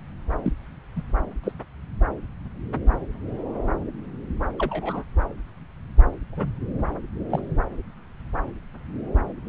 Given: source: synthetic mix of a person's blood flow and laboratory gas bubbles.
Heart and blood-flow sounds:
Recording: Doppler ultrasound of blood flow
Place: subclavian vein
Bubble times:
0.43-0.53 s: bubbles
0.96-1.01 s: bubbles
1.43-1.52 s: bubbles
4.58-5.04 s: bubbles
6.32-6.51 s: bubbles
7.30-7.40 s: bubbles
From the record:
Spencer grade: 2 (many but less than half of the cardiac periods contain bubble signals, singularly or in groups)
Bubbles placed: anywhere in the cardiac cycle

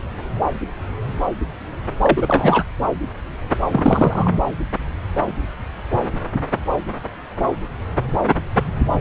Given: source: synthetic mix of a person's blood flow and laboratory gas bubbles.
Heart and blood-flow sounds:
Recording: Doppler ultrasound of blood flow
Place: subclavian vein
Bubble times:
2.00-2.64 s: bubbles
3.71-4.31 s: bubbles
From the record:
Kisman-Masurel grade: 223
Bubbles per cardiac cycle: several, 3 to 8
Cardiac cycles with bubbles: 10 to 50%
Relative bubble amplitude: loud (0.450 to 0.775)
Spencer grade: 2 (many but less than half of the cardiac periods contain bubble signals, singularly or in groups)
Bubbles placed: anywhere in the cardiac cycle

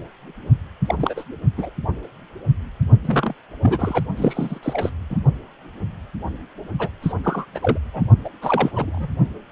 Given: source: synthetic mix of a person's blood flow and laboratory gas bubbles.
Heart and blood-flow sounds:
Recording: Doppler ultrasound of blood flow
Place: precordium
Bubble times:
0.86-0.95 s: bubbles
0.99-1.24 s: bubbles
1.57-1.70 s: bubbles
3.05-3.35 s: bubbles
3.62-4.04 s: bubbles
4.17-4.59 s: bubbles
4.62-4.89 s: bubbles
5.10-5.18 s: bubbles
6.79-6.88 s: bubbles
7.02-7.12 s: bubbles
7.24-7.46 s: bubbles
7.54-7.59 s: bubbles
7.62-7.79 s: bubbles
7.93-8.03 s: bubbles
8.24-8.29 s: bubbles
8.41-8.71 s: bubbles
8.76-9.08 s: bubbles
From the record:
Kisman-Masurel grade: 232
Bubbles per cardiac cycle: several, 3 to 8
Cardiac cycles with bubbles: 50 to 99%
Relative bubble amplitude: moderate (0.250 to 0.450)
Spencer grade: 3 (all of the cardiac periods contain showers or single bubble signals, but not dominating or overriding the cardiac motion signals)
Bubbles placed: only in the low amplitude regions of the cardiac cycle

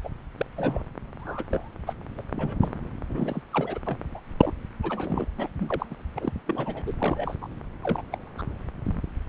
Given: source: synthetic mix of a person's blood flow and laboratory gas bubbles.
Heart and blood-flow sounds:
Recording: Doppler ultrasound of blood flow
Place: subclavian vein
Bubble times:
0.03-0.09 s: bubbles
0.37-0.46 s: bubbles
0.56-0.84 s: bubbles
1.19-1.69 s: bubbles
1.87-1.94 s: bubbles
2.17-2.23 s: bubbles
2.33-2.69 s: bubbles
3.10-3.42 s: bubbles
3.51-3.79 s: bubbles
3.87-3.98 s: bubbles
4.14-4.20 s: bubbles
4.37-4.53 s: bubbles
4.83-5.28 s: bubbles
5.37-5.48 s: bubbles
5.59-5.86 s: bubbles
5.90-5.96 s: bubbles
6.16-6.33 s: bubbles
6.46-6.93 s: bubbles
7.00-7.35 s: bubbles
7.41-7.47 s: bubbles
7.81-8.02 s: bubbles
8.12-8.18 s: bubbles
8.38-8.43 s: bubbles
8.85-8.94 s: bubbles
From the record:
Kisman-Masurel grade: 242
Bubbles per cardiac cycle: several, 3 to 8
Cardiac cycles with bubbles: 100%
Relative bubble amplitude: moderate (0.250 to 0.450)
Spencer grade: 3 (all of the cardiac periods contain showers or single bubble signals, but not dominating or overriding the cardiac motion signals)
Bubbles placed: anywhere in the cardiac cycle

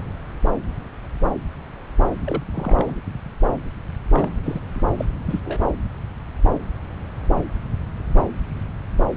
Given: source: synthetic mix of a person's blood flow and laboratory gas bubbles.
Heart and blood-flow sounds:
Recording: Doppler ultrasound of blood flow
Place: subclavian vein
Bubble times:
2.26-2.43 s: bubbles
2.54-2.96 s: bubbles
4.10-4.31 s: bubbles
4.44-4.60 s: bubbles
4.75-4.80 s: bubbles
4.98-5.04 s: bubbles
5.25-5.39 s: bubbles
5.45-5.65 s: bubbles
From the record:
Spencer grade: 2 (many but less than half of the cardiac periods contain bubble signals, singularly or in groups)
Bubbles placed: anywhere in the cardiac cycle

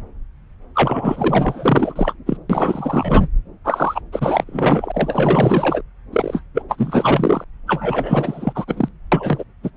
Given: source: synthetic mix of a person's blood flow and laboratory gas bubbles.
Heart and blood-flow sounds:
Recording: Doppler ultrasound of blood flow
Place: subclavian vein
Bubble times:
0.74-2.15 s: bubbles
2.26-2.37 s: bubbles
2.50-3.28 s: bubbles
3.65-4.01 s: bubbles
4.12-5.82 s: bubbles
6.12-6.42 s: bubbles
6.54-6.62 s: bubbles
6.69-7.44 s: bubbles
7.67-8.65 s: bubbles
8.68-8.88 s: bubbles
9.12-9.44 s: bubbles
9.63-9.70 s: bubbles
From the record:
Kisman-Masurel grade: 444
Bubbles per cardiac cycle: continuous sound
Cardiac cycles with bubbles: 100%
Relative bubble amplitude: maximal (0.775 to 0.999)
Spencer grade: 4 (maximum detectable bubble signal sounding continuously throughout systole and diastole of every cardiac period, and overriding the amplitude of the normal cardiac signals)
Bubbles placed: anywhere in the cardiac cycle

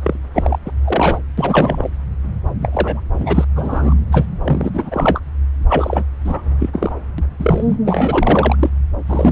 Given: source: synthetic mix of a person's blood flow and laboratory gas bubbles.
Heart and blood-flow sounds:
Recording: Doppler ultrasound of blood flow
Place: subclavian vein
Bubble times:
0.04-0.18 s: bubbles
0.33-0.58 s: bubbles
0.66-0.72 s: bubbles
0.84-1.19 s: bubbles
1.38-1.88 s: bubbles
2.60-3.00 s: bubbles
3.13-3.44 s: bubbles
3.56-3.94 s: bubbles
4.11-4.25 s: bubbles
4.44-5.20 s: bubbles
5.67-6.04 s: bubbles
6.24-6.41 s: bubbles
6.59-6.69 s: bubbles
6.73-6.92 s: bubbles
7.18-7.24 s: bubbles
7.39-7.76 s: bubbles
7.85-8.56 s: bubbles
8.59-8.70 s: bubbles
9.06-9.32 s: bubbles
From the record:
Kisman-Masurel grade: 343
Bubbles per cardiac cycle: rolling drumbeat, 9 or more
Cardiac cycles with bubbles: 100%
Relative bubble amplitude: loud (0.450 to 0.775)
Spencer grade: 3 (all of the cardiac periods contain showers or single bubble signals, but not dominating or overriding the cardiac motion signals)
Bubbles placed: anywhere in the cardiac cycle

